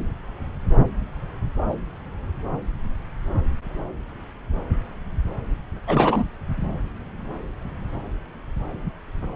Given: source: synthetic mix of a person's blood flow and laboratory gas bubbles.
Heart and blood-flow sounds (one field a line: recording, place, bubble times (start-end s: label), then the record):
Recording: Doppler ultrasound of blood flow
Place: subclavian vein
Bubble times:
5.87-6.24 s: bubbles
From the record:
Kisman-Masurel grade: 212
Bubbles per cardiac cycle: several, 3 to 8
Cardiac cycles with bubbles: 1 to 10%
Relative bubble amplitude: moderate (0.250 to 0.450)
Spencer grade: 1 (occasional bubble signal discernible with the cardiac motion signal, with majority of cardiac periods free of bubbles)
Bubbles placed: anywhere in the cardiac cycle